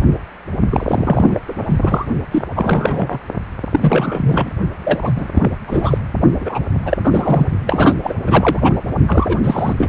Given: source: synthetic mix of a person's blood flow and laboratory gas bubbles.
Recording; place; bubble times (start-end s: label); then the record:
Doppler ultrasound of blood flow; precordium
0.70-1.40 s: bubbles
1.46-2.06 s: bubbles
2.31-2.43 s: bubbles
2.55-3.19 s: bubbles
3.72-4.51 s: bubbles
4.84-4.99 s: bubbles
5.01-5.12 s: bubbles
5.15-5.27 s: bubbles
5.35-5.50 s: bubbles
5.67-5.98 s: bubbles
6.40-6.59 s: bubbles
6.85-6.97 s: bubbles
7.04-7.47 s: bubbles
7.67-7.94 s: bubbles
8.02-8.15 s: bubbles
8.25-8.59 s: bubbles
8.63-8.74 s: bubbles
9.07-9.39 s: bubbles
9.44-9.73 s: bubbles
9.77-9.89 s: bubbles
From the record:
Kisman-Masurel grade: 333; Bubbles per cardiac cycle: rolling drumbeat, 9 or more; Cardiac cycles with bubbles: 50 to 99%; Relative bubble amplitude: loud (0.450 to 0.775); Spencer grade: 3 (all of the cardiac periods contain showers or single bubble signals, but not dominating or overriding the cardiac motion signals); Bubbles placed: only in the low amplitude regions of the cardiac cycle